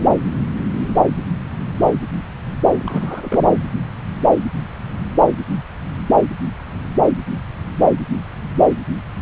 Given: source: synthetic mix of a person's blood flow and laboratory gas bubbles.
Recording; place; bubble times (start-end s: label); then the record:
Doppler ultrasound of blood flow; subclavian vein
2.79-3.42 s: bubbles
From the record:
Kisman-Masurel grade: 211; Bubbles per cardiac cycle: several, 3 to 8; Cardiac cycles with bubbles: 1 to 10%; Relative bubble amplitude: barely perceptible (0.100 to 0.250); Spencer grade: 1 (occasional bubble signal discernible with the cardiac motion signal, with majority of cardiac periods free of bubbles); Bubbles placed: anywhere in the cardiac cycle